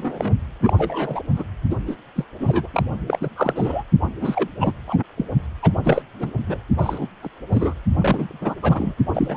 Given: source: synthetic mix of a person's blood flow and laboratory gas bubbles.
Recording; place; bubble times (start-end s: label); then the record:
Doppler ultrasound of blood flow; precordium
0.00-0.36 s: bubbles
0.60-1.22 s: bubbles
1.36-1.44 s: bubbles
1.70-1.77 s: bubbles
1.87-1.96 s: bubbles
2.15-2.25 s: bubbles
2.40-2.67 s: bubbles
2.73-2.83 s: bubbles
3.08-3.29 s: bubbles
3.36-3.84 s: bubbles
4.21-4.48 s: bubbles
4.60-4.76 s: bubbles
4.88-5.03 s: bubbles
5.17-5.25 s: bubbles
5.62-5.72 s: bubbles
5.84-6.02 s: bubbles
6.19-6.30 s: bubbles
6.47-6.58 s: bubbles
6.77-7.08 s: bubbles
7.22-7.29 s: bubbles
7.50-7.74 s: bubbles
7.98-8.54 s: bubbles
8.62-8.94 s: bubbles
9.13-9.37 s: bubbles
From the record:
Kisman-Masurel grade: 242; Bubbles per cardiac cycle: several, 3 to 8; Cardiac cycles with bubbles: 100%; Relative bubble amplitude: moderate (0.250 to 0.450); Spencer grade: 3 (all of the cardiac periods contain showers or single bubble signals, but not dominating or overriding the cardiac motion signals); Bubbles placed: anywhere in the cardiac cycle